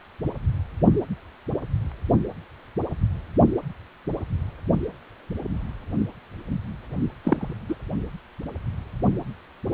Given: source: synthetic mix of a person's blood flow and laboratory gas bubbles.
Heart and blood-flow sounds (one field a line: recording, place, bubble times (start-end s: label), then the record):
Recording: Doppler ultrasound of blood flow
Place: precordium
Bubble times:
7.23-7.57 s: bubbles
7.68-7.75 s: bubbles
From the record:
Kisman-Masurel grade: 122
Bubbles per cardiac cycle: 1 to 2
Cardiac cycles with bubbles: 10 to 50%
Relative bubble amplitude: moderate (0.250 to 0.450)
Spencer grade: 2 (many but less than half of the cardiac periods contain bubble signals, singularly or in groups)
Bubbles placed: only in the low amplitude regions of the cardiac cycle